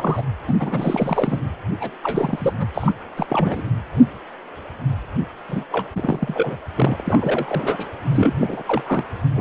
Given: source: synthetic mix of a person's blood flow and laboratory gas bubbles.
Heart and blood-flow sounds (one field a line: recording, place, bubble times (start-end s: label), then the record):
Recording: Doppler ultrasound of blood flow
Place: precordium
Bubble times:
0.00-0.23 s: bubbles
0.47-0.55 s: bubbles
0.60-1.39 s: bubbles
1.80-1.92 s: bubbles
2.02-2.54 s: bubbles
2.58-2.69 s: bubbles
2.73-2.93 s: bubbles
3.17-3.62 s: bubbles
5.49-5.64 s: bubbles
5.71-5.87 s: bubbles
5.96-6.60 s: bubbles
6.77-7.86 s: bubbles
8.04-8.63 s: bubbles
8.66-8.82 s: bubbles
8.86-9.04 s: bubbles
9.35-9.41 s: bubbles
From the record:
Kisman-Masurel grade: 332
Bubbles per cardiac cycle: rolling drumbeat, 9 or more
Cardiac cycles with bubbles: 50 to 99%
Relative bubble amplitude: moderate (0.250 to 0.450)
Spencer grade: 3 (all of the cardiac periods contain showers or single bubble signals, but not dominating or overriding the cardiac motion signals)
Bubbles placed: anywhere in the cardiac cycle